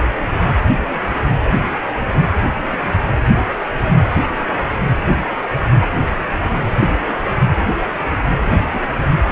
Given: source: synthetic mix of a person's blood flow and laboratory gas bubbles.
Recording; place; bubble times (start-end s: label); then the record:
Doppler ultrasound of blood flow; precordium
5.42-5.81 s: bubbles
8.35-8.96 s: bubbles
From the record:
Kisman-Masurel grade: 221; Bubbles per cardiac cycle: several, 3 to 8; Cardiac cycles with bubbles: 10 to 50%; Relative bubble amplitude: barely perceptible (0.100 to 0.250); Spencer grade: 2 (many but less than half of the cardiac periods contain bubble signals, singularly or in groups); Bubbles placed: anywhere in the cardiac cycle